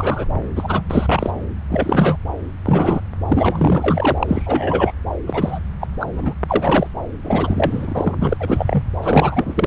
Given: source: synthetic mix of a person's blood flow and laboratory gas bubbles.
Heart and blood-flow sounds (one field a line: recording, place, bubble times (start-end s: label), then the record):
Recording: Doppler ultrasound of blood flow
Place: subclavian vein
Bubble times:
0.00-0.26 s: bubbles
0.55-0.82 s: bubbles
0.90-1.30 s: bubbles
1.69-2.17 s: bubbles
2.64-3.01 s: bubbles
3.28-4.92 s: bubbles
5.26-5.59 s: bubbles
5.80-5.88 s: bubbles
6.00-6.08 s: bubbles
6.17-6.33 s: bubbles
6.48-6.87 s: bubbles
7.22-8.15 s: bubbles
8.19-8.85 s: bubbles
9.02-9.67 s: bubbles
From the record:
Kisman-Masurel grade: 343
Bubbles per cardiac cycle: rolling drumbeat, 9 or more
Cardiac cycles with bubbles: 100%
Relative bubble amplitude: loud (0.450 to 0.775)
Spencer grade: 3 (all of the cardiac periods contain showers or single bubble signals, but not dominating or overriding the cardiac motion signals)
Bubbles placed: anywhere in the cardiac cycle